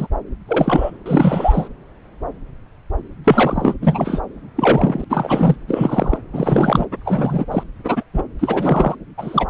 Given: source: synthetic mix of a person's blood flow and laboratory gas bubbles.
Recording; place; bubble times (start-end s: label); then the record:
Doppler ultrasound of blood flow; subclavian vein
0.00-0.07 s: bubbles
0.47-0.91 s: bubbles
1.05-1.68 s: bubbles
3.24-3.74 s: bubbles
3.81-4.21 s: bubbles
4.56-5.04 s: bubbles
5.09-5.55 s: bubbles
5.67-6.18 s: bubbles
6.33-6.86 s: bubbles
7.04-7.45 s: bubbles
7.51-7.63 s: bubbles
7.84-8.03 s: bubbles
8.13-8.22 s: bubbles
8.39-8.96 s: bubbles
9.18-9.46 s: bubbles
From the record:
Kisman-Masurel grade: 233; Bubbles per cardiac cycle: several, 3 to 8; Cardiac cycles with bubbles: 50 to 99%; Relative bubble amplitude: loud (0.450 to 0.775); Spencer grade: 3 (all of the cardiac periods contain showers or single bubble signals, but not dominating or overriding the cardiac motion signals); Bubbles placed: anywhere in the cardiac cycle